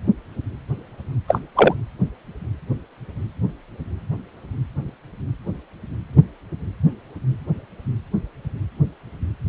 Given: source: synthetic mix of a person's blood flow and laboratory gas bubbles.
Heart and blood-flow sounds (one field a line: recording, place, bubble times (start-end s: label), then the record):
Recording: Doppler ultrasound of blood flow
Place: precordium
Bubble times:
1.27-1.40 s: bubbles
1.55-1.74 s: bubbles
From the record:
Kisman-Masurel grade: 113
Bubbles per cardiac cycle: 1 to 2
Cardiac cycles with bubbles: 1 to 10%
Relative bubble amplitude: loud (0.450 to 0.775)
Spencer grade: 1 (occasional bubble signal discernible with the cardiac motion signal, with majority of cardiac periods free of bubbles)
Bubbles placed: anywhere in the cardiac cycle